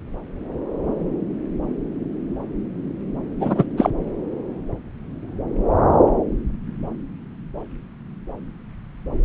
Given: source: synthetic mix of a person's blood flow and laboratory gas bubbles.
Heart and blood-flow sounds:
Doppler ultrasound of blood flow; subclavian vein
3.39-3.66 s: bubbles
3.77-3.90 s: bubbles
From the record:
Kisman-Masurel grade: 212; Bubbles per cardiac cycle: several, 3 to 8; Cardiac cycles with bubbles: 1 to 10%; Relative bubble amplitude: moderate (0.250 to 0.450); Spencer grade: 1 (occasional bubble signal discernible with the cardiac motion signal, with majority of cardiac periods free of bubbles); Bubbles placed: anywhere in the cardiac cycle

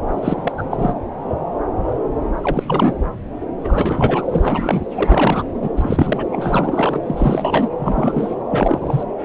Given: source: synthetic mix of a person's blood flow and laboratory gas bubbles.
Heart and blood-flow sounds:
Doppler ultrasound of blood flow; subclavian vein
0.10-0.52 s: bubbles
0.57-0.64 s: bubbles
0.71-0.94 s: bubbles
2.38-2.96 s: bubbles
3.64-4.25 s: bubbles
4.31-4.85 s: bubbles
4.95-5.43 s: bubbles
5.62-5.69 s: bubbles
5.76-6.26 s: bubbles
6.32-6.99 s: bubbles
7.04-7.69 s: bubbles
7.79-8.36 s: bubbles
8.50-9.03 s: bubbles
From the record:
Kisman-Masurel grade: 332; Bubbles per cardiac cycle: rolling drumbeat, 9 or more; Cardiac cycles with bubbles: 50 to 99%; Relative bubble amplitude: moderate (0.250 to 0.450); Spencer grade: 3 (all of the cardiac periods contain showers or single bubble signals, but not dominating or overriding the cardiac motion signals); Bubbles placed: anywhere in the cardiac cycle

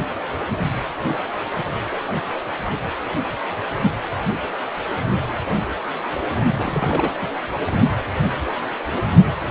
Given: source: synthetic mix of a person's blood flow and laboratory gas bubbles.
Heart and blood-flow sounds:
Doppler ultrasound of blood flow; precordium
6.58-7.27 s: bubbles
7.66-7.72 s: bubbles
From the record:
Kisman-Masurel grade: 211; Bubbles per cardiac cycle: several, 3 to 8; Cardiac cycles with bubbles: 1 to 10%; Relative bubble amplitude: barely perceptible (0.100 to 0.250); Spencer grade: 1 (occasional bubble signal discernible with the cardiac motion signal, with majority of cardiac periods free of bubbles); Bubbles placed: only in the low amplitude regions of the cardiac cycle

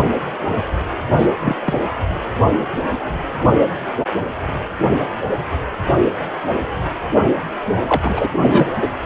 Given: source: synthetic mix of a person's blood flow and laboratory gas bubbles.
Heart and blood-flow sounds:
Doppler ultrasound of blood flow; precordium
1.17-1.28 s: bubbles
1.40-1.55 s: bubbles
1.65-1.80 s: bubbles
7.74-7.82 s: bubbles
7.87-8.02 s: bubbles
8.04-8.29 s: bubbles
8.41-8.88 s: bubbles
From the record:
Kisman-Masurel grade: 223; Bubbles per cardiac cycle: several, 3 to 8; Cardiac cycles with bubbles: 10 to 50%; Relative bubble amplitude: loud (0.450 to 0.775); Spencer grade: 2 (many but less than half of the cardiac periods contain bubble signals, singularly or in groups); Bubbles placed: anywhere in the cardiac cycle

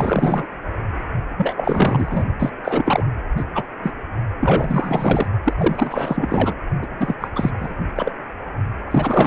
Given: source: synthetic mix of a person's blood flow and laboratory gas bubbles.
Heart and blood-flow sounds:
Doppler ultrasound of blood flow; precordium
0.00-0.48 s: bubbles
1.36-2.23 s: bubbles
2.39-2.52 s: bubbles
2.64-3.04 s: bubbles
3.37-3.45 s: bubbles
3.54-3.63 s: bubbles
3.83-3.94 s: bubbles
4.40-5.28 s: bubbles
5.44-5.54 s: bubbles
5.58-6.54 s: bubbles
6.82-6.87 s: bubbles
7.00-7.15 s: bubbles
7.20-7.28 s: bubbles
7.36-7.50 s: bubbles
7.57-7.74 s: bubbles
7.95-8.12 s: bubbles
8.90-9.26 s: bubbles
From the record:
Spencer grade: 4 (maximum detectable bubble signal sounding continuously throughout systole and diastole of every cardiac period, and overriding the amplitude of the normal cardiac signals); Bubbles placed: only in the low amplitude regions of the cardiac cycle

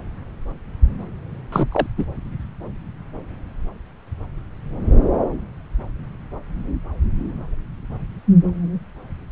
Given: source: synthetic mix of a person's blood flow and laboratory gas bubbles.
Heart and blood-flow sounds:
Doppler ultrasound of blood flow; subclavian vein
1.52-1.69 s: bubbles
1.72-1.86 s: bubbles
1.97-2.05 s: bubbles
From the record:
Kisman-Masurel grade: 213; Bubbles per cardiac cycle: several, 3 to 8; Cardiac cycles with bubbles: 1 to 10%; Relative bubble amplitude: loud (0.450 to 0.775); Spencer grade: 1 (occasional bubble signal discernible with the cardiac motion signal, with majority of cardiac periods free of bubbles); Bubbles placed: anywhere in the cardiac cycle

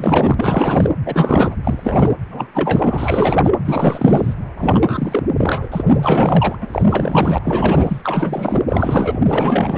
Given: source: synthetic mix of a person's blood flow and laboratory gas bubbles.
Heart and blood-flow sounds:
Doppler ultrasound of blood flow; precordium
0.00-0.91 s: bubbles
1.05-1.56 s: bubbles
1.64-2.10 s: bubbles
2.28-2.52 s: bubbles
2.54-3.40 s: bubbles
3.43-3.51 s: bubbles
3.65-4.34 s: bubbles
4.58-5.23 s: bubbles
5.37-5.69 s: bubbles
5.71-5.84 s: bubbles
5.88-6.57 s: bubbles
6.62-7.38 s: bubbles
7.44-8.62 s: bubbles
8.68-9.19 s: bubbles
9.27-9.78 s: bubbles
From the record:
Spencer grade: 4 (maximum detectable bubble signal sounding continuously throughout systole and diastole of every cardiac period, and overriding the amplitude of the normal cardiac signals); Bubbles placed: anywhere in the cardiac cycle

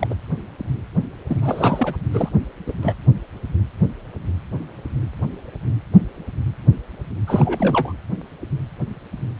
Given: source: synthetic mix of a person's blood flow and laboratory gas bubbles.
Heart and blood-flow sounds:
Doppler ultrasound of blood flow; precordium
0.00-0.07 s: bubbles
0.10-0.14 s: bubbles
1.27-1.96 s: bubbles
2.12-2.29 s: bubbles
2.66-2.73 s: bubbles
2.82-2.94 s: bubbles
7.27-7.92 s: bubbles
From the record:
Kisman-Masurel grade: 222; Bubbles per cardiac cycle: several, 3 to 8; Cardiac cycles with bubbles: 10 to 50%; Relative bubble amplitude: moderate (0.250 to 0.450); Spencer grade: 2 (many but less than half of the cardiac periods contain bubble signals, singularly or in groups); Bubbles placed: anywhere in the cardiac cycle

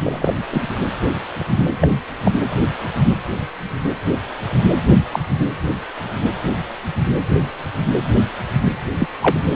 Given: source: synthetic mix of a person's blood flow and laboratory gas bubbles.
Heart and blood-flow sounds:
Doppler ultrasound of blood flow; precordium
0.04-0.32 s: bubbles
0.54-0.60 s: bubbles
1.81-1.89 s: bubbles
2.25-2.31 s: bubbles
5.11-5.19 s: bubbles
5.39-5.47 s: bubbles
8.99-9.07 s: bubbles
9.22-9.39 s: bubbles
From the record:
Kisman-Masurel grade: 123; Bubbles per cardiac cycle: 1 to 2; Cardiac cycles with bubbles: 10 to 50%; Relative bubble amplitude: loud (0.450 to 0.775); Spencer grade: 2 (many but less than half of the cardiac periods contain bubble signals, singularly or in groups); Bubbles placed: anywhere in the cardiac cycle

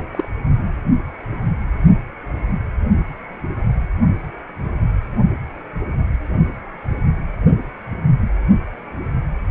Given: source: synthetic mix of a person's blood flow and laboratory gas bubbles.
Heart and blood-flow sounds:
Doppler ultrasound of blood flow; precordium
0.00-0.02 s: bubbles
0.12-0.28 s: bubbles
From the record:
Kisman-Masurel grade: 222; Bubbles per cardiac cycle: several, 3 to 8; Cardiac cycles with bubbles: 10 to 50%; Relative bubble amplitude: moderate (0.250 to 0.450); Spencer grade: 2 (many but less than half of the cardiac periods contain bubble signals, singularly or in groups); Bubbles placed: only in the low amplitude regions of the cardiac cycle

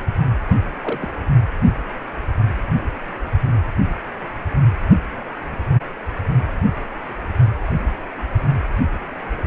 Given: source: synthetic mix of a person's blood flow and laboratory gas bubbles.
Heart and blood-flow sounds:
Doppler ultrasound of blood flow; precordium
0.82-1.10 s: bubbles
From the record:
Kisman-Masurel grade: 111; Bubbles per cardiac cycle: 1 to 2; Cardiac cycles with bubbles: 1 to 10%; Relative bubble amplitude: barely perceptible (0.100 to 0.250); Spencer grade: 1 (occasional bubble signal discernible with the cardiac motion signal, with majority of cardiac periods free of bubbles); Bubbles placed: only in the low amplitude regions of the cardiac cycle

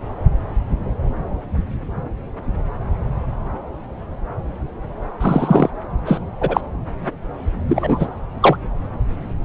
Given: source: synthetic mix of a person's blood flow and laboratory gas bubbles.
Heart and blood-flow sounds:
Doppler ultrasound of blood flow; subclavian vein
5.20-5.70 s: bubbles
6.06-6.21 s: bubbles
6.41-6.61 s: bubbles
7.68-8.09 s: bubbles
8.40-8.56 s: bubbles
From the record:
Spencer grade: 2 (many but less than half of the cardiac periods contain bubble signals, singularly or in groups); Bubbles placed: anywhere in the cardiac cycle

